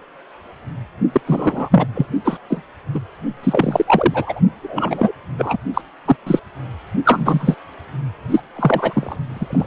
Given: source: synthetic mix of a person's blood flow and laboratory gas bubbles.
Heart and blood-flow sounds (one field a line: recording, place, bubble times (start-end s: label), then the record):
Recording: Doppler ultrasound of blood flow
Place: precordium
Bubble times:
1.13-1.21 s: bubbles
1.26-1.86 s: bubbles
1.95-2.06 s: bubbles
2.25-2.38 s: bubbles
2.50-2.65 s: bubbles
2.94-3.00 s: bubbles
3.43-4.40 s: bubbles
4.62-5.12 s: bubbles
5.38-5.58 s: bubbles
5.74-5.82 s: bubbles
6.06-6.16 s: bubbles
6.27-6.40 s: bubbles
7.05-7.55 s: bubbles
8.29-8.40 s: bubbles
8.55-9.16 s: bubbles
9.29-9.67 s: bubbles
From the record:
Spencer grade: 3 (all of the cardiac periods contain showers or single bubble signals, but not dominating or overriding the cardiac motion signals)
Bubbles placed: only in the low amplitude regions of the cardiac cycle